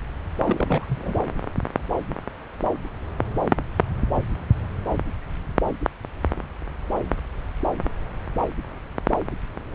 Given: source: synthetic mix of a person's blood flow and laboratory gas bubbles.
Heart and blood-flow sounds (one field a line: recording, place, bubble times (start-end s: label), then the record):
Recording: Doppler ultrasound of blood flow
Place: subclavian vein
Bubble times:
0.45-1.14 s: bubbles
From the record:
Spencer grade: 1 (occasional bubble signal discernible with the cardiac motion signal, with majority of cardiac periods free of bubbles)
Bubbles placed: anywhere in the cardiac cycle